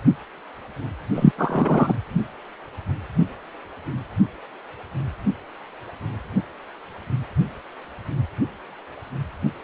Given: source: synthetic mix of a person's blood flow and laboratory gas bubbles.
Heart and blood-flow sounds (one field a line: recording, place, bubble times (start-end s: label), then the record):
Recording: Doppler ultrasound of blood flow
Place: precordium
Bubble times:
1.15-1.31 s: bubbles
1.38-1.94 s: bubbles
From the record:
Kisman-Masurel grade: 213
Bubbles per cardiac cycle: several, 3 to 8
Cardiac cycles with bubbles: 1 to 10%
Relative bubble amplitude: loud (0.450 to 0.775)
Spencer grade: 1 (occasional bubble signal discernible with the cardiac motion signal, with majority of cardiac periods free of bubbles)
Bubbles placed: anywhere in the cardiac cycle